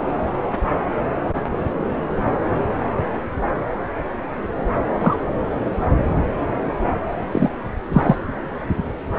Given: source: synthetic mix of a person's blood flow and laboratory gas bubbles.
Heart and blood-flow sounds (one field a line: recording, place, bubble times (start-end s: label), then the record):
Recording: Doppler ultrasound of blood flow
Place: subclavian vein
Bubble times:
5.00-5.16 s: bubbles
7.32-7.50 s: bubbles
7.93-8.16 s: bubbles
From the record:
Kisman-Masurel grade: 123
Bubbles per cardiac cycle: 1 to 2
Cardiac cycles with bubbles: 10 to 50%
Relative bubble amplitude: loud (0.450 to 0.775)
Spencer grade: 2 (many but less than half of the cardiac periods contain bubble signals, singularly or in groups)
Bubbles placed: anywhere in the cardiac cycle